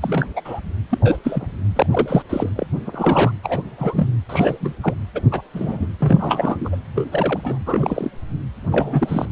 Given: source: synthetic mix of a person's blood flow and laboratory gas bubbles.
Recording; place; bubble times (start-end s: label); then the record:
Doppler ultrasound of blood flow; precordium
0.02-0.26 s: bubbles
0.35-0.41 s: bubbles
0.45-0.60 s: bubbles
0.90-0.98 s: bubbles
1.00-1.17 s: bubbles
1.23-1.46 s: bubbles
1.76-1.86 s: bubbles
1.91-2.22 s: bubbles
2.29-2.50 s: bubbles
2.56-2.67 s: bubbles
2.84-3.32 s: bubbles
3.43-3.62 s: bubbles
3.77-4.07 s: bubbles
4.29-4.74 s: bubbles
4.81-4.94 s: bubbles
5.15-5.22 s: bubbles
5.31-5.42 s: bubbles
5.54-5.88 s: bubbles
5.99-6.77 s: bubbles
6.96-7.07 s: bubbles
7.11-7.58 s: bubbles
7.66-8.10 s: bubbles
8.63-9.27 s: bubbles
From the record:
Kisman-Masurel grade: 242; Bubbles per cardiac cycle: several, 3 to 8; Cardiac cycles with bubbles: 100%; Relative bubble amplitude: moderate (0.250 to 0.450); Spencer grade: 3 (all of the cardiac periods contain showers or single bubble signals, but not dominating or overriding the cardiac motion signals); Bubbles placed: anywhere in the cardiac cycle